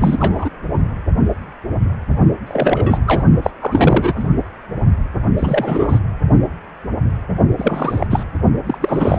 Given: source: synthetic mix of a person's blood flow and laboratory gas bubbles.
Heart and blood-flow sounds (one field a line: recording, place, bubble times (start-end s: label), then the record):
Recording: Doppler ultrasound of blood flow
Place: precordium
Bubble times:
0.00-0.50 s: bubbles
2.46-2.98 s: bubbles
3.07-3.23 s: bubbles
3.42-3.50 s: bubbles
3.61-4.27 s: bubbles
5.37-5.99 s: bubbles
7.57-8.06 s: bubbles
8.10-8.25 s: bubbles
8.66-8.78 s: bubbles
8.81-9.19 s: bubbles
From the record:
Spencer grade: 3 (all of the cardiac periods contain showers or single bubble signals, but not dominating or overriding the cardiac motion signals)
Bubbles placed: only in the low amplitude regions of the cardiac cycle